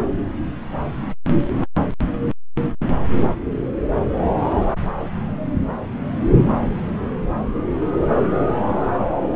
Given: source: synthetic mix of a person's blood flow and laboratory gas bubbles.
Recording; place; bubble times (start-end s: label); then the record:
Doppler ultrasound of blood flow; subclavian vein
no bubbles
From the record:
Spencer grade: 0 (complete lack of bubble signals)